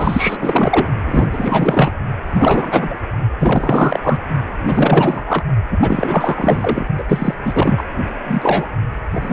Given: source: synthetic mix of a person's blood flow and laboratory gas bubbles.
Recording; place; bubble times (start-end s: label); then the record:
Doppler ultrasound of blood flow; precordium
0.00-0.89 s: bubbles
1.05-1.28 s: bubbles
1.31-1.92 s: bubbles
2.32-2.98 s: bubbles
3.39-4.00 s: bubbles
4.03-4.17 s: bubbles
4.66-5.45 s: bubbles
5.71-6.85 s: bubbles
6.98-7.04 s: bubbles
7.08-7.35 s: bubbles
7.45-7.85 s: bubbles
8.26-8.67 s: bubbles
9.14-9.33 s: bubbles
From the record:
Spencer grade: 4 (maximum detectable bubble signal sounding continuously throughout systole and diastole of every cardiac period, and overriding the amplitude of the normal cardiac signals); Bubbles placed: only in the low amplitude regions of the cardiac cycle